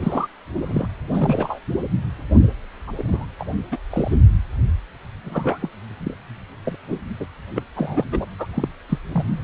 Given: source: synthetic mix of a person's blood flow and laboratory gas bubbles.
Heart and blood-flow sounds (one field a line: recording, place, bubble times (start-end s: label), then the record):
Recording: Doppler ultrasound of blood flow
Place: precordium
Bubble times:
0.00-0.27 s: bubbles
0.57-0.88 s: bubbles
1.12-1.59 s: bubbles
2.87-2.92 s: bubbles
2.97-3.25 s: bubbles
3.39-3.45 s: bubbles
3.71-3.78 s: bubbles
3.90-4.18 s: bubbles
5.24-5.69 s: bubbles
6.00-6.14 s: bubbles
6.63-6.76 s: bubbles
6.88-7.00 s: bubbles
7.20-7.26 s: bubbles
7.55-7.62 s: bubbles
7.75-8.04 s: bubbles
8.12-8.25 s: bubbles
8.38-8.47 s: bubbles
8.54-8.68 s: bubbles
8.88-8.98 s: bubbles
9.13-9.41 s: bubbles
From the record:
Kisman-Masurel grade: 232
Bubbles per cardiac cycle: several, 3 to 8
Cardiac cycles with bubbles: 50 to 99%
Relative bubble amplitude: moderate (0.250 to 0.450)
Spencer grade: 3 (all of the cardiac periods contain showers or single bubble signals, but not dominating or overriding the cardiac motion signals)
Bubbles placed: anywhere in the cardiac cycle